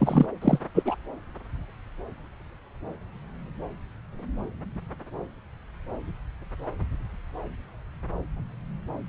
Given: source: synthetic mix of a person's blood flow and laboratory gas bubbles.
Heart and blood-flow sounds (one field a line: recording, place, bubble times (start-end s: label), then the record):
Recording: Doppler ultrasound of blood flow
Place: subclavian vein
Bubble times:
0.00-0.26 s: bubbles
0.41-0.58 s: bubbles
0.75-0.96 s: bubbles
From the record:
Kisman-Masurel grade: 213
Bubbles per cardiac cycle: several, 3 to 8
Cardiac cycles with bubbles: 1 to 10%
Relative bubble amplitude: loud (0.450 to 0.775)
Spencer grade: 1 (occasional bubble signal discernible with the cardiac motion signal, with majority of cardiac periods free of bubbles)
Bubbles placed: anywhere in the cardiac cycle